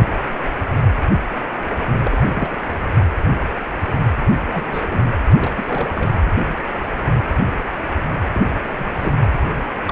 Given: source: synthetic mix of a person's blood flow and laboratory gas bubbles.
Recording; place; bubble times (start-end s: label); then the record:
Doppler ultrasound of blood flow; precordium
2.04-2.88 s: bubbles
4.33-4.38 s: bubbles
4.42-5.03 s: bubbles
5.40-5.52 s: bubbles
5.57-6.09 s: bubbles
8.32-8.42 s: bubbles
8.71-9.29 s: bubbles
9.85-9.92 s: bubbles
From the record:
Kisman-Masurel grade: 221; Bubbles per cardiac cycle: several, 3 to 8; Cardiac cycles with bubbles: 10 to 50%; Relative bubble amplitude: barely perceptible (0.100 to 0.250); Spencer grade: 2 (many but less than half of the cardiac periods contain bubble signals, singularly or in groups); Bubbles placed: anywhere in the cardiac cycle